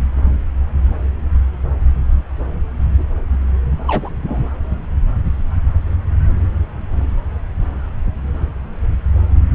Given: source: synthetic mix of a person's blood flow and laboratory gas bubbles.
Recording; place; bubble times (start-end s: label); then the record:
Doppler ultrasound of blood flow; subclavian vein
3.87-4.09 s: bubbles
4.27-4.47 s: bubbles
From the record:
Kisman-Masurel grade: 113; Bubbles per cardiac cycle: 1 to 2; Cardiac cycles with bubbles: 1 to 10%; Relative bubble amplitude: loud (0.450 to 0.775); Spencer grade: 1 (occasional bubble signal discernible with the cardiac motion signal, with majority of cardiac periods free of bubbles); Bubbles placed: anywhere in the cardiac cycle